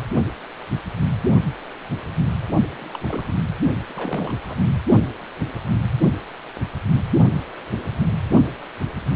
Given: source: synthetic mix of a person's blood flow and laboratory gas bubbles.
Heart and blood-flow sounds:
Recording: Doppler ultrasound of blood flow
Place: precordium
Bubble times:
2.81-3.31 s: bubbles
3.90-3.93 s: bubbles
3.95-4.36 s: bubbles
4.47-4.58 s: bubbles
From the record:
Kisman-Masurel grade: 221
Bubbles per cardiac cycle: several, 3 to 8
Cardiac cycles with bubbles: 10 to 50%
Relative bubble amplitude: barely perceptible (0.100 to 0.250)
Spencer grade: 2 (many but less than half of the cardiac periods contain bubble signals, singularly or in groups)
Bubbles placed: only in the low amplitude regions of the cardiac cycle

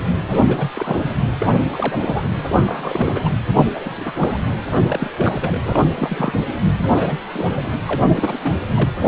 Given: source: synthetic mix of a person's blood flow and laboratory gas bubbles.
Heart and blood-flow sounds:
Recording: Doppler ultrasound of blood flow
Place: precordium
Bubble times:
0.30-0.41 s: bubbles
0.48-0.72 s: bubbles
0.75-1.11 s: bubbles
1.39-1.47 s: bubbles
1.73-2.28 s: bubbles
2.48-3.31 s: bubbles
3.56-3.70 s: bubbles
3.74-4.13 s: bubbles
4.18-4.38 s: bubbles
4.71-4.78 s: bubbles
4.87-5.11 s: bubbles
5.17-5.58 s: bubbles
5.64-5.88 s: bubbles
5.95-6.40 s: bubbles
6.78-7.18 s: bubbles
7.33-7.75 s: bubbles
7.87-8.61 s: bubbles
8.67-8.90 s: bubbles
9.01-9.08 s: bubbles
From the record:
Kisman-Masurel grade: 342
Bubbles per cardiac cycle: rolling drumbeat, 9 or more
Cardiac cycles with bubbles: 100%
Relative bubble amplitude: moderate (0.250 to 0.450)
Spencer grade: 3 (all of the cardiac periods contain showers or single bubble signals, but not dominating or overriding the cardiac motion signals)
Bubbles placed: anywhere in the cardiac cycle

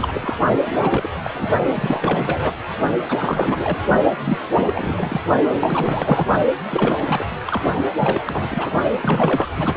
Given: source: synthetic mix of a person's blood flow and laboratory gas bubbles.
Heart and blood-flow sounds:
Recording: Doppler ultrasound of blood flow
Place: precordium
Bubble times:
0.00-0.38 s: bubbles
0.67-1.07 s: bubbles
1.23-1.31 s: bubbles
1.33-1.51 s: bubbles
1.73-2.54 s: bubbles
3.08-3.60 s: bubbles
3.64-3.79 s: bubbles
4.25-4.37 s: bubbles
4.55-5.21 s: bubbles
5.59-6.27 s: bubbles
6.69-7.26 s: bubbles
7.46-7.61 s: bubbles
7.99-8.21 s: bubbles
8.26-8.71 s: bubbles
9.02-9.75 s: bubbles
From the record:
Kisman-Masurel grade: 342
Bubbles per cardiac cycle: rolling drumbeat, 9 or more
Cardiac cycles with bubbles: 100%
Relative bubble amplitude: moderate (0.250 to 0.450)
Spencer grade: 3 (all of the cardiac periods contain showers or single bubble signals, but not dominating or overriding the cardiac motion signals)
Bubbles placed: only in the low amplitude regions of the cardiac cycle

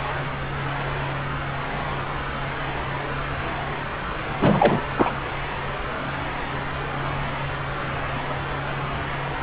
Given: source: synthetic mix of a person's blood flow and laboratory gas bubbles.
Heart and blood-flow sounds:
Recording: Doppler ultrasound of blood flow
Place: subclavian vein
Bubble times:
4.40-4.82 s: bubbles
4.96-5.12 s: bubbles
From the record:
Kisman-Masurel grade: 213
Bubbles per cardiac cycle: several, 3 to 8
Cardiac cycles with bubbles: 1 to 10%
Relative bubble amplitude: loud (0.450 to 0.775)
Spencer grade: 1 (occasional bubble signal discernible with the cardiac motion signal, with majority of cardiac periods free of bubbles)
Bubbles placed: anywhere in the cardiac cycle

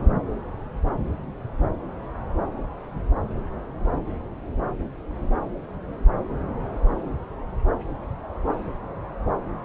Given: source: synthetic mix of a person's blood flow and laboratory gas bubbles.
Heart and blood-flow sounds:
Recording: Doppler ultrasound of blood flow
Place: subclavian vein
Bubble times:
0.00-0.03 s: bubbles
From the record:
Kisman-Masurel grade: 211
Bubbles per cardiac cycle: several, 3 to 8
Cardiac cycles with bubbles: 1 to 10%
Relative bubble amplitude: barely perceptible (0.100 to 0.250)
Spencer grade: 1 (occasional bubble signal discernible with the cardiac motion signal, with majority of cardiac periods free of bubbles)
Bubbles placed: anywhere in the cardiac cycle

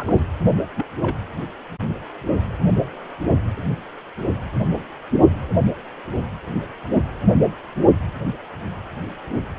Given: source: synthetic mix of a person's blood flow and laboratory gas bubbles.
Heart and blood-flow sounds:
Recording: Doppler ultrasound of blood flow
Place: precordium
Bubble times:
0.00-0.19 s: bubbles
0.76-0.86 s: bubbles
1.01-1.16 s: bubbles
From the record:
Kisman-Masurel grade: 121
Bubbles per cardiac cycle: 1 to 2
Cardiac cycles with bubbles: 10 to 50%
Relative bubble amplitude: barely perceptible (0.100 to 0.250)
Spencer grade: 2 (many but less than half of the cardiac periods contain bubble signals, singularly or in groups)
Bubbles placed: anywhere in the cardiac cycle

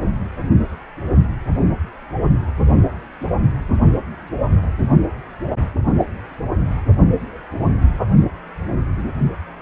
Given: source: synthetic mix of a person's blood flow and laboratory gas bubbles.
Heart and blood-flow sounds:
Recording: Doppler ultrasound of blood flow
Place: precordium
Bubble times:
no bubbles
From the record:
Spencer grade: 0 (complete lack of bubble signals)

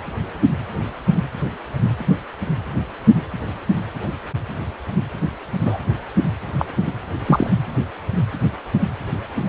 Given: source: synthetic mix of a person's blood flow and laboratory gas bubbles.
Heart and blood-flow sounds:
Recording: Doppler ultrasound of blood flow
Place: precordium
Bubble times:
5.65-5.78 s: bubbles
6.59-6.66 s: bubbles
6.86-6.92 s: bubbles
7.26-7.50 s: bubbles
From the record:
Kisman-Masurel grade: 123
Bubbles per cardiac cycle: 1 to 2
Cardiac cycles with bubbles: 10 to 50%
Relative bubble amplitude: loud (0.450 to 0.775)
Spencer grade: 2 (many but less than half of the cardiac periods contain bubble signals, singularly or in groups)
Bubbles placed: anywhere in the cardiac cycle

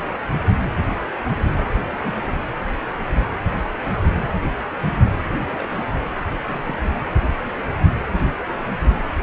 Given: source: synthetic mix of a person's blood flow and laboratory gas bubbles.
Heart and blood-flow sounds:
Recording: Doppler ultrasound of blood flow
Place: precordium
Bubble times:
1.56-1.88 s: bubbles
1.91-1.97 s: bubbles
2.03-2.27 s: bubbles
5.23-5.39 s: bubbles
5.51-6.01 s: bubbles
6.36-6.40 s: bubbles
6.45-6.79 s: bubbles
6.83-6.88 s: bubbles
From the record:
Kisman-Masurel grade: 221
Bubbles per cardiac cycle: several, 3 to 8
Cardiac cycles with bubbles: 10 to 50%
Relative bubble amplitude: barely perceptible (0.100 to 0.250)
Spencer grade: 2 (many but less than half of the cardiac periods contain bubble signals, singularly or in groups)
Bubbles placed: anywhere in the cardiac cycle

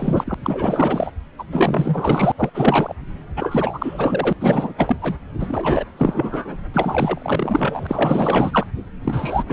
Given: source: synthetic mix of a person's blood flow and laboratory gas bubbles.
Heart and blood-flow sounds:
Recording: Doppler ultrasound of blood flow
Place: subclavian vein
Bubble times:
0.00-0.34 s: bubbles
0.43-1.11 s: bubbles
1.38-1.44 s: bubbles
1.52-2.32 s: bubbles
2.37-2.50 s: bubbles
2.54-2.94 s: bubbles
3.36-4.33 s: bubbles
4.41-4.74 s: bubbles
4.78-4.97 s: bubbles
5.01-5.15 s: bubbles
5.39-5.84 s: bubbles
5.98-6.57 s: bubbles
6.74-8.66 s: bubbles
9.04-9.43 s: bubbles
9.47-9.53 s: bubbles
From the record:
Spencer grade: 4 (maximum detectable bubble signal sounding continuously throughout systole and diastole of every cardiac period, and overriding the amplitude of the normal cardiac signals)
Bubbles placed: anywhere in the cardiac cycle

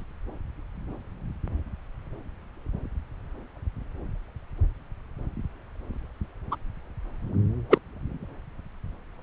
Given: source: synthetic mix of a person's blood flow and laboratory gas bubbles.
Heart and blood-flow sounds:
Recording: Doppler ultrasound of blood flow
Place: subclavian vein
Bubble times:
0.00-0.03 s: bubbles
6.51-6.55 s: bubbles
7.70-7.78 s: bubbles
From the record:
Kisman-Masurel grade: 123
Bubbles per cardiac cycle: 1 to 2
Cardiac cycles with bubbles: 10 to 50%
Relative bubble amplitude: loud (0.450 to 0.775)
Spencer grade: 2 (many but less than half of the cardiac periods contain bubble signals, singularly or in groups)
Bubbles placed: anywhere in the cardiac cycle

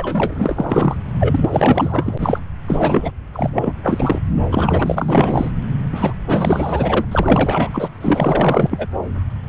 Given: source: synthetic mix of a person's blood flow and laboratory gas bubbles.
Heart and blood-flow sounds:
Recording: Doppler ultrasound of blood flow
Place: subclavian vein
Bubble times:
0.00-0.96 s: bubbles
1.20-2.40 s: bubbles
2.67-3.11 s: bubbles
3.33-3.74 s: bubbles
3.82-4.21 s: bubbles
4.49-5.52 s: bubbles
5.92-6.13 s: bubbles
6.27-7.05 s: bubbles
7.11-7.71 s: bubbles
7.74-7.90 s: bubbles
8.01-8.87 s: bubbles
From the record:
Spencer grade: 4 (maximum detectable bubble signal sounding continuously throughout systole and diastole of every cardiac period, and overriding the amplitude of the normal cardiac signals)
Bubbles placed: anywhere in the cardiac cycle

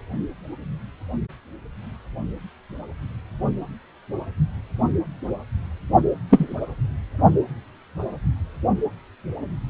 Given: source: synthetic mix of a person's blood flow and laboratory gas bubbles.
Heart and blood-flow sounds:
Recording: Doppler ultrasound of blood flow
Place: precordium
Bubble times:
6.30-6.57 s: bubbles
From the record:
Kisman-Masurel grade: 113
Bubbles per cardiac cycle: 1 to 2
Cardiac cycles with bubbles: 1 to 10%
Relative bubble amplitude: loud (0.450 to 0.775)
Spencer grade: 1 (occasional bubble signal discernible with the cardiac motion signal, with majority of cardiac periods free of bubbles)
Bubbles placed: only in the low amplitude regions of the cardiac cycle

